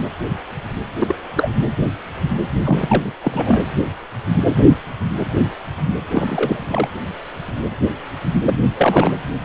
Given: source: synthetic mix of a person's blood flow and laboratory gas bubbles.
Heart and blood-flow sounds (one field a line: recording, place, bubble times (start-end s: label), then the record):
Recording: Doppler ultrasound of blood flow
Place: precordium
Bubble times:
0.99-1.15 s: bubbles
1.36-1.50 s: bubbles
2.64-3.12 s: bubbles
3.24-3.62 s: bubbles
6.11-6.88 s: bubbles
8.44-8.61 s: bubbles
8.77-9.11 s: bubbles
From the record:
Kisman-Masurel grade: 223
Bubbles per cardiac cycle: several, 3 to 8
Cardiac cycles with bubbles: 10 to 50%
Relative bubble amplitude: loud (0.450 to 0.775)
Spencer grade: 2 (many but less than half of the cardiac periods contain bubble signals, singularly or in groups)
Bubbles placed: anywhere in the cardiac cycle